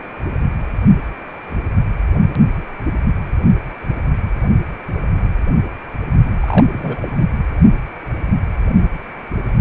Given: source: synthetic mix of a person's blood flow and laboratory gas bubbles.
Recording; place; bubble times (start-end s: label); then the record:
Doppler ultrasound of blood flow; precordium
6.40-7.08 s: bubbles
7.18-7.25 s: bubbles
From the record:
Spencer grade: 1 (occasional bubble signal discernible with the cardiac motion signal, with majority of cardiac periods free of bubbles); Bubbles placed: only in the low amplitude regions of the cardiac cycle